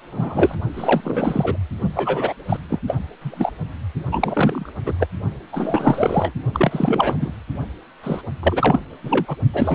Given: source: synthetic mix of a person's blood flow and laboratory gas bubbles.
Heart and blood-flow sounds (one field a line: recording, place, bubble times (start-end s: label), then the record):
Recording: Doppler ultrasound of blood flow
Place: precordium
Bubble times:
0.11-0.55 s: bubbles
0.74-1.57 s: bubbles
1.95-2.33 s: bubbles
2.49-2.57 s: bubbles
2.69-2.79 s: bubbles
2.88-2.97 s: bubbles
3.21-3.52 s: bubbles
4.12-4.73 s: bubbles
4.86-4.95 s: bubbles
4.99-5.07 s: bubbles
5.52-6.32 s: bubbles
6.53-7.34 s: bubbles
8.03-8.21 s: bubbles
8.43-8.79 s: bubbles
9.03-9.37 s: bubbles
9.54-9.75 s: bubbles
From the record:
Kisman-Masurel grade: 343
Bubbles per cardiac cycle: rolling drumbeat, 9 or more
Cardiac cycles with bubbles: 100%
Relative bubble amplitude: loud (0.450 to 0.775)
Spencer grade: 3 (all of the cardiac periods contain showers or single bubble signals, but not dominating or overriding the cardiac motion signals)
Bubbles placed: only in the low amplitude regions of the cardiac cycle